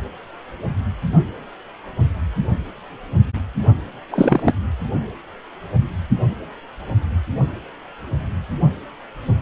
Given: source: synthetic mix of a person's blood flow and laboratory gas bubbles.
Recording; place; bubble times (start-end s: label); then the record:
Doppler ultrasound of blood flow; precordium
4.11-4.52 s: bubbles
From the record:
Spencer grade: 1 (occasional bubble signal discernible with the cardiac motion signal, with majority of cardiac periods free of bubbles); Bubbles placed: only in the low amplitude regions of the cardiac cycle